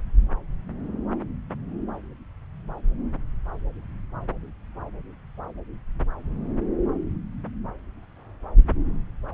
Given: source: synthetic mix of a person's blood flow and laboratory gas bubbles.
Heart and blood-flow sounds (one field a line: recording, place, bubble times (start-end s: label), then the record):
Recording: Doppler ultrasound of blood flow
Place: subclavian vein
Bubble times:
no bubbles
From the record:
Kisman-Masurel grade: 000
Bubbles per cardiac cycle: 0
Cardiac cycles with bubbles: 0%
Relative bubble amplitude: no bubbles discernible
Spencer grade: 0 (complete lack of bubble signals)